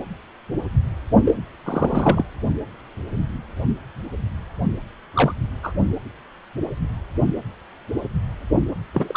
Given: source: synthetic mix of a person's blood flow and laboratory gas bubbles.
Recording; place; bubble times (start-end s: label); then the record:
Doppler ultrasound of blood flow; precordium
1.25-1.34 s: bubbles
1.65-2.23 s: bubbles
5.14-5.34 s: bubbles
5.63-5.72 s: bubbles
8.94-9.16 s: bubbles
From the record:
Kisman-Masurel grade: 222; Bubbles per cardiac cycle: several, 3 to 8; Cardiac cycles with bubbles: 10 to 50%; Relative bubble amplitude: moderate (0.250 to 0.450); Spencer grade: 2 (many but less than half of the cardiac periods contain bubble signals, singularly or in groups); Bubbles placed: only in the low amplitude regions of the cardiac cycle